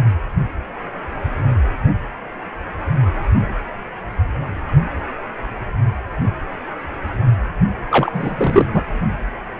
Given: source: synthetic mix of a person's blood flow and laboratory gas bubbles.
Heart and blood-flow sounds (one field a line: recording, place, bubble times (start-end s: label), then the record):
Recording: Doppler ultrasound of blood flow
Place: precordium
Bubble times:
7.90-8.11 s: bubbles
8.13-8.66 s: bubbles
8.73-8.85 s: bubbles
From the record:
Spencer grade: 1 (occasional bubble signal discernible with the cardiac motion signal, with majority of cardiac periods free of bubbles)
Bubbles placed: only in the low amplitude regions of the cardiac cycle